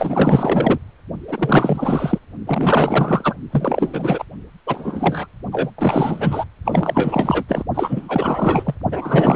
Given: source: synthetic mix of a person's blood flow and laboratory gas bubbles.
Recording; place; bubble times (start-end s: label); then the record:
Doppler ultrasound of blood flow; precordium
0.00-0.78 s: bubbles
1.27-2.19 s: bubbles
2.46-3.34 s: bubbles
3.52-4.24 s: bubbles
4.67-5.27 s: bubbles
5.51-5.71 s: bubbles
5.78-6.45 s: bubbles
6.64-7.44 s: bubbles
7.48-7.63 s: bubbles
7.74-8.75 s: bubbles
8.91-9.35 s: bubbles
From the record:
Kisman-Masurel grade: 444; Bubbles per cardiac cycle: continuous sound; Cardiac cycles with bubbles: 100%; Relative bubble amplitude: maximal (0.775 to 0.999); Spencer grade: 4 (maximum detectable bubble signal sounding continuously throughout systole and diastole of every cardiac period, and overriding the amplitude of the normal cardiac signals); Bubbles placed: only in the low amplitude regions of the cardiac cycle